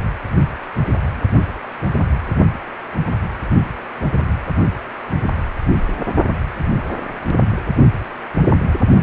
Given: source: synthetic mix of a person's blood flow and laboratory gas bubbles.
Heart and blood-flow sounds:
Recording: Doppler ultrasound of blood flow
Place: precordium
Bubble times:
no bubbles
From the record:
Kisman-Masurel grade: 000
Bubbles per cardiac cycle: 0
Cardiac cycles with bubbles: 0%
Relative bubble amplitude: no bubbles discernible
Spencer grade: 0 (complete lack of bubble signals)

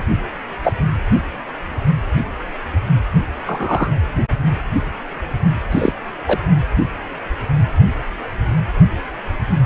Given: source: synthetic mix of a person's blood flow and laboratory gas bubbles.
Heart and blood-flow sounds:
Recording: Doppler ultrasound of blood flow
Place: precordium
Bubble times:
0.64-0.72 s: bubbles
3.46-3.91 s: bubbles
5.71-5.92 s: bubbles
6.26-6.40 s: bubbles
From the record:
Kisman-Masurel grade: 123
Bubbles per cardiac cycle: 1 to 2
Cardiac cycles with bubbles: 10 to 50%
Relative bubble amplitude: loud (0.450 to 0.775)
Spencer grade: 2 (many but less than half of the cardiac periods contain bubble signals, singularly or in groups)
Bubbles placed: only in the low amplitude regions of the cardiac cycle

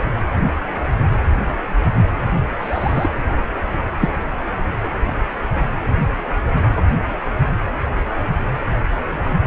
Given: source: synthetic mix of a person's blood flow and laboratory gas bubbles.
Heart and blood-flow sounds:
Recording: Doppler ultrasound of blood flow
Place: precordium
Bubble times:
2.61-3.09 s: bubbles
3.99-4.09 s: bubbles
6.75-6.83 s: bubbles
From the record:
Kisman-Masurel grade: 122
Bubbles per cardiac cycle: 1 to 2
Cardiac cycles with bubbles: 10 to 50%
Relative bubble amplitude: moderate (0.250 to 0.450)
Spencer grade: 2 (many but less than half of the cardiac periods contain bubble signals, singularly or in groups)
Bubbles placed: anywhere in the cardiac cycle

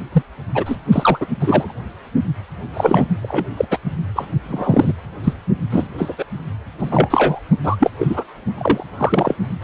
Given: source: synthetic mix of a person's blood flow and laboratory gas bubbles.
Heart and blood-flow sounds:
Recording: Doppler ultrasound of blood flow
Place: precordium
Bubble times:
0.12-0.22 s: bubbles
0.55-0.77 s: bubbles
0.92-1.26 s: bubbles
1.40-1.73 s: bubbles
2.73-3.05 s: bubbles
3.22-3.45 s: bubbles
3.56-3.65 s: bubbles
3.70-3.77 s: bubbles
4.15-4.25 s: bubbles
4.44-4.93 s: bubbles
5.24-5.33 s: bubbles
5.70-5.87 s: bubbles
5.98-6.14 s: bubbles
6.18-6.24 s: bubbles
6.79-7.40 s: bubbles
7.64-7.76 s: bubbles
7.80-7.90 s: bubbles
7.99-8.24 s: bubbles
8.58-8.84 s: bubbles
8.97-9.35 s: bubbles
9.61-9.64 s: bubbles
From the record:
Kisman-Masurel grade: 243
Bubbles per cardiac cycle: several, 3 to 8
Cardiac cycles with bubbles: 100%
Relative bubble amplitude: loud (0.450 to 0.775)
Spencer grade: 3 (all of the cardiac periods contain showers or single bubble signals, but not dominating or overriding the cardiac motion signals)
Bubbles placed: only in the low amplitude regions of the cardiac cycle

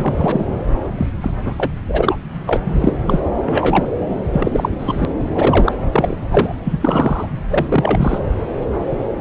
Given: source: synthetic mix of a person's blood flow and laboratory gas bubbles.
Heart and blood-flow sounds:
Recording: Doppler ultrasound of blood flow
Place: subclavian vein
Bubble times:
0.00-0.45 s: bubbles
0.83-0.89 s: bubbles
0.97-1.09 s: bubbles
1.21-1.31 s: bubbles
1.44-1.72 s: bubbles
1.88-2.17 s: bubbles
2.46-2.57 s: bubbles
2.65-2.96 s: bubbles
3.06-3.21 s: bubbles
3.44-3.86 s: bubbles
4.30-4.70 s: bubbles
4.79-5.05 s: bubbles
5.35-5.72 s: bubbles
5.92-6.17 s: bubbles
6.30-6.55 s: bubbles
6.64-7.29 s: bubbles
7.50-8.19 s: bubbles
From the record:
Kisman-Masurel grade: 233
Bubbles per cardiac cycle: several, 3 to 8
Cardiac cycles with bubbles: 50 to 99%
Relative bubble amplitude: loud (0.450 to 0.775)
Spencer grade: 3 (all of the cardiac periods contain showers or single bubble signals, but not dominating or overriding the cardiac motion signals)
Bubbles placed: anywhere in the cardiac cycle

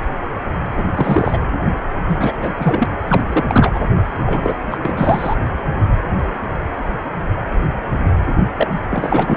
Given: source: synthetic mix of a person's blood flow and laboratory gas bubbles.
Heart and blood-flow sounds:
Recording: Doppler ultrasound of blood flow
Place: precordium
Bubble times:
0.77-0.84 s: bubbles
0.94-1.40 s: bubbles
2.08-2.54 s: bubbles
2.60-2.85 s: bubbles
3.06-3.23 s: bubbles
3.26-3.45 s: bubbles
3.47-3.80 s: bubbles
4.25-4.57 s: bubbles
4.71-4.78 s: bubbles
4.82-5.36 s: bubbles
8.56-8.68 s: bubbles
8.90-9.37 s: bubbles
From the record:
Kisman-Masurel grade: 333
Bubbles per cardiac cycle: rolling drumbeat, 9 or more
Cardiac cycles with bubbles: 50 to 99%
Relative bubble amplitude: loud (0.450 to 0.775)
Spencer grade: 3 (all of the cardiac periods contain showers or single bubble signals, but not dominating or overriding the cardiac motion signals)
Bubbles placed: anywhere in the cardiac cycle

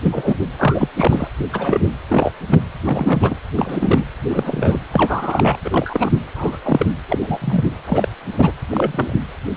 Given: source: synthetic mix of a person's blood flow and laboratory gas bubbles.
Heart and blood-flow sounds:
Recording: Doppler ultrasound of blood flow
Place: precordium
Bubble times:
0.03-0.36 s: bubbles
0.59-0.88 s: bubbles
0.96-1.27 s: bubbles
1.52-1.89 s: bubbles
2.08-2.31 s: bubbles
2.50-2.58 s: bubbles
2.84-3.36 s: bubbles
3.54-4.04 s: bubbles
4.29-4.79 s: bubbles
4.93-5.58 s: bubbles
5.65-6.10 s: bubbles
6.35-6.58 s: bubbles
6.65-6.87 s: bubbles
7.08-7.18 s: bubbles
7.22-7.38 s: bubbles
7.41-7.64 s: bubbles
7.87-8.08 s: bubbles
8.37-8.52 s: bubbles
8.70-9.14 s: bubbles
From the record:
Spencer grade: 3 (all of the cardiac periods contain showers or single bubble signals, but not dominating or overriding the cardiac motion signals)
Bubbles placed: anywhere in the cardiac cycle

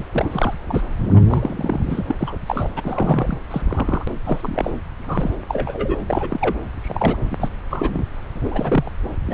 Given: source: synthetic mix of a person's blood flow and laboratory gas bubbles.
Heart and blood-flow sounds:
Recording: Doppler ultrasound of blood flow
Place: subclavian vein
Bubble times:
0.00-0.05 s: bubbles
0.11-0.54 s: bubbles
0.68-0.82 s: bubbles
1.13-1.21 s: bubbles
1.26-2.00 s: bubbles
2.08-2.15 s: bubbles
2.19-2.35 s: bubbles
2.46-2.71 s: bubbles
2.76-3.38 s: bubbles
3.50-4.05 s: bubbles
4.25-4.71 s: bubbles
5.08-5.36 s: bubbles
5.49-5.96 s: bubbles
6.07-6.60 s: bubbles
6.82-7.18 s: bubbles
7.31-7.37 s: bubbles
7.41-7.49 s: bubbles
7.71-8.05 s: bubbles
8.34-8.90 s: bubbles
9.26-9.34 s: bubbles
From the record:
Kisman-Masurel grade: 242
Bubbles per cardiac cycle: several, 3 to 8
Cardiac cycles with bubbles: 100%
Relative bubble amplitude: moderate (0.250 to 0.450)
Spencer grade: 3 (all of the cardiac periods contain showers or single bubble signals, but not dominating or overriding the cardiac motion signals)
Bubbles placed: anywhere in the cardiac cycle

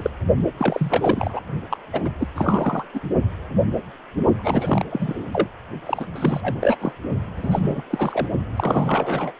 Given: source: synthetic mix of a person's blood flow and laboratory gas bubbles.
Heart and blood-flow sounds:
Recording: Doppler ultrasound of blood flow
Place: precordium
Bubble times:
0.00-0.10 s: bubbles
0.58-1.40 s: bubbles
1.70-1.78 s: bubbles
1.93-2.00 s: bubbles
2.03-2.10 s: bubbles
2.19-2.28 s: bubbles
2.35-2.85 s: bubbles
2.94-3.00 s: bubbles
4.36-4.85 s: bubbles
4.90-5.23 s: bubbles
5.32-5.47 s: bubbles
5.85-6.06 s: bubbles
6.15-6.75 s: bubbles
6.80-6.92 s: bubbles
7.36-7.82 s: bubbles
7.90-8.28 s: bubbles
8.56-9.32 s: bubbles
From the record:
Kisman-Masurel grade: 332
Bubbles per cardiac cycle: rolling drumbeat, 9 or more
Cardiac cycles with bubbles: 50 to 99%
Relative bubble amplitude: moderate (0.250 to 0.450)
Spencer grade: 3 (all of the cardiac periods contain showers or single bubble signals, but not dominating or overriding the cardiac motion signals)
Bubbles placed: only in the low amplitude regions of the cardiac cycle

